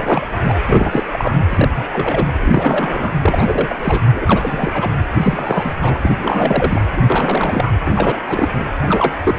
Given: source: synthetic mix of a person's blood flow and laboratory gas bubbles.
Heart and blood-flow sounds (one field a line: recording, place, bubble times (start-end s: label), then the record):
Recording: Doppler ultrasound of blood flow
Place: precordium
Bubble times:
0.00-0.28 s: bubbles
0.44-0.60 s: bubbles
0.65-1.04 s: bubbles
1.10-1.35 s: bubbles
1.49-1.69 s: bubbles
1.75-1.85 s: bubbles
1.88-2.27 s: bubbles
2.41-3.11 s: bubbles
3.21-3.76 s: bubbles
3.78-4.01 s: bubbles
4.12-4.90 s: bubbles
5.11-5.73 s: bubbles
5.79-6.82 s: bubbles
6.97-7.02 s: bubbles
7.07-7.71 s: bubbles
7.84-8.20 s: bubbles
8.26-8.49 s: bubbles
8.83-9.19 s: bubbles
9.24-9.35 s: bubbles
From the record:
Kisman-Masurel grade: 343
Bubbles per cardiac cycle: rolling drumbeat, 9 or more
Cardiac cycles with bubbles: 100%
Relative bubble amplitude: loud (0.450 to 0.775)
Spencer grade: 3 (all of the cardiac periods contain showers or single bubble signals, but not dominating or overriding the cardiac motion signals)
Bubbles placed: anywhere in the cardiac cycle